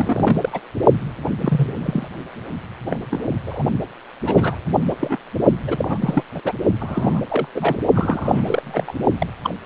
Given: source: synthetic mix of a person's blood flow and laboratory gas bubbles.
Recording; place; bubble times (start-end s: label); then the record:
Doppler ultrasound of blood flow; precordium
0.00-0.49 s: bubbles
0.52-0.60 s: bubbles
1.24-1.28 s: bubbles
1.39-1.75 s: bubbles
1.80-2.08 s: bubbles
2.90-3.00 s: bubbles
3.10-3.22 s: bubbles
3.46-3.63 s: bubbles
4.25-4.56 s: bubbles
4.88-4.95 s: bubbles
5.00-5.17 s: bubbles
5.67-6.24 s: bubbles
6.34-6.40 s: bubbles
6.45-6.53 s: bubbles
6.80-7.21 s: bubbles
7.29-7.46 s: bubbles
7.54-7.78 s: bubbles
7.95-8.94 s: bubbles
9.19-9.27 s: bubbles
9.43-9.54 s: bubbles
From the record:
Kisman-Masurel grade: 242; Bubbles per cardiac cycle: several, 3 to 8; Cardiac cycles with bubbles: 100%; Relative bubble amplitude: moderate (0.250 to 0.450); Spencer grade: 3 (all of the cardiac periods contain showers or single bubble signals, but not dominating or overriding the cardiac motion signals); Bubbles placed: only in the low amplitude regions of the cardiac cycle